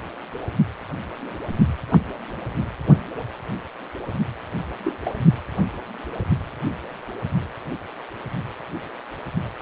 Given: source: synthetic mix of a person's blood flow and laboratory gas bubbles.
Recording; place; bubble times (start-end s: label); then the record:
Doppler ultrasound of blood flow; precordium
1.91-1.98 s: bubbles
4.84-4.92 s: bubbles
5.04-5.12 s: bubbles
From the record:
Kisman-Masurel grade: 121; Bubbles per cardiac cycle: 1 to 2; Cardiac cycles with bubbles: 10 to 50%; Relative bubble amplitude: barely perceptible (0.100 to 0.250); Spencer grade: 2 (many but less than half of the cardiac periods contain bubble signals, singularly or in groups); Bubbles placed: only in the low amplitude regions of the cardiac cycle